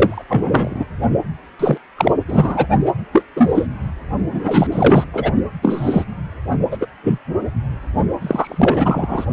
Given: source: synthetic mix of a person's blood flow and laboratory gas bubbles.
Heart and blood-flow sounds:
Doppler ultrasound of blood flow; precordium
0.00-0.24 s: bubbles
0.29-0.85 s: bubbles
1.59-1.78 s: bubbles
1.97-2.12 s: bubbles
2.28-2.66 s: bubbles
3.12-3.24 s: bubbles
3.36-3.67 s: bubbles
4.32-4.67 s: bubbles
4.71-5.04 s: bubbles
5.13-5.32 s: bubbles
5.62-6.04 s: bubbles
6.71-6.77 s: bubbles
6.81-6.86 s: bubbles
7.04-7.20 s: bubbles
8.21-9.26 s: bubbles
From the record:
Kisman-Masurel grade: 243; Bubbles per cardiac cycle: several, 3 to 8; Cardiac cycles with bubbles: 100%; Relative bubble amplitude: loud (0.450 to 0.775); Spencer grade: 3 (all of the cardiac periods contain showers or single bubble signals, but not dominating or overriding the cardiac motion signals); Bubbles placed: only in the low amplitude regions of the cardiac cycle

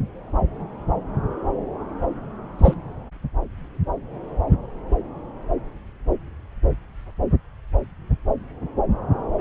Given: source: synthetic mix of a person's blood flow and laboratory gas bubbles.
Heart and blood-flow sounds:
Doppler ultrasound of blood flow; subclavian vein
2.59-2.74 s: bubbles
From the record:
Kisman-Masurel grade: 112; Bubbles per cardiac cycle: 1 to 2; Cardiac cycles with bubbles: 1 to 10%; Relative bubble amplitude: moderate (0.250 to 0.450); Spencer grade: 1 (occasional bubble signal discernible with the cardiac motion signal, with majority of cardiac periods free of bubbles); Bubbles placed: anywhere in the cardiac cycle

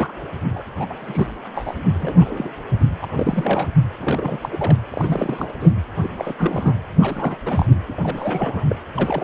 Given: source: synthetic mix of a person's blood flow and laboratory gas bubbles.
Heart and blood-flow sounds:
Doppler ultrasound of blood flow; precordium
0.00-0.12 s: bubbles
0.56-0.63 s: bubbles
0.77-0.86 s: bubbles
0.89-0.93 s: bubbles
0.98-1.37 s: bubbles
1.55-1.75 s: bubbles
1.94-2.51 s: bubbles
2.79-2.85 s: bubbles
3.02-3.06 s: bubbles
3.15-3.67 s: bubbles
4.00-4.49 s: bubbles
4.52-4.76 s: bubbles
4.90-5.53 s: bubbles
5.60-5.71 s: bubbles
6.03-6.09 s: bubbles
6.17-6.35 s: bubbles
6.38-6.75 s: bubbles
7.00-7.35 s: bubbles
7.46-7.66 s: bubbles
7.88-7.93 s: bubbles
7.97-8.65 s: bubbles
8.69-8.76 s: bubbles
8.96-9.23 s: bubbles
From the record:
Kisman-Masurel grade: 342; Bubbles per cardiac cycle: rolling drumbeat, 9 or more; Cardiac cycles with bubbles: 100%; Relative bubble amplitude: moderate (0.250 to 0.450); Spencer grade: 3 (all of the cardiac periods contain showers or single bubble signals, but not dominating or overriding the cardiac motion signals); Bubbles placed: anywhere in the cardiac cycle

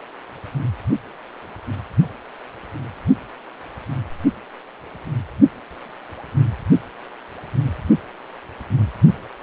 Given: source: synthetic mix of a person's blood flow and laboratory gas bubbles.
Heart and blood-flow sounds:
Doppler ultrasound of blood flow; precordium
no bubbles
From the record:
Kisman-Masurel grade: 000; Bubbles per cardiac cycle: 0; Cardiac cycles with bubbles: 0%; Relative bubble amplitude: no bubbles discernible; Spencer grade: 0 (complete lack of bubble signals)

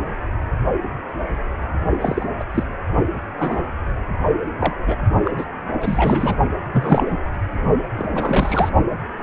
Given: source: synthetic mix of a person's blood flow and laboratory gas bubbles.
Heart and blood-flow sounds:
Doppler ultrasound of blood flow; precordium
2.01-2.30 s: bubbles
2.39-2.45 s: bubbles
2.54-2.64 s: bubbles
3.38-3.62 s: bubbles
4.60-4.75 s: bubbles
4.86-4.96 s: bubbles
5.25-5.31 s: bubbles
5.37-5.44 s: bubbles
5.81-6.36 s: bubbles
6.72-7.16 s: bubbles
7.97-8.70 s: bubbles
From the record:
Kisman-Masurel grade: 222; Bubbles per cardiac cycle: several, 3 to 8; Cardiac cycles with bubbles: 10 to 50%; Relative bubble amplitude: moderate (0.250 to 0.450); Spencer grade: 2 (many but less than half of the cardiac periods contain bubble signals, singularly or in groups); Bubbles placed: only in the low amplitude regions of the cardiac cycle

